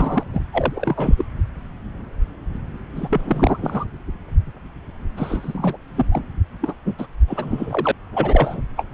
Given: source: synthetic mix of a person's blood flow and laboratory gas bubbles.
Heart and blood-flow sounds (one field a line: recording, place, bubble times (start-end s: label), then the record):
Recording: Doppler ultrasound of blood flow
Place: subclavian vein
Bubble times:
0.00-0.23 s: bubbles
0.33-0.40 s: bubbles
0.52-1.25 s: bubbles
2.96-3.85 s: bubbles
5.17-5.78 s: bubbles
5.96-6.06 s: bubbles
6.12-6.24 s: bubbles
6.61-6.74 s: bubbles
6.84-6.95 s: bubbles
6.98-7.07 s: bubbles
7.27-7.91 s: bubbles
8.13-8.61 s: bubbles
8.77-8.86 s: bubbles
From the record:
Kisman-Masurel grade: 333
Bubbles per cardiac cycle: rolling drumbeat, 9 or more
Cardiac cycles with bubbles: 50 to 99%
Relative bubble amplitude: loud (0.450 to 0.775)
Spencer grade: 3 (all of the cardiac periods contain showers or single bubble signals, but not dominating or overriding the cardiac motion signals)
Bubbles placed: anywhere in the cardiac cycle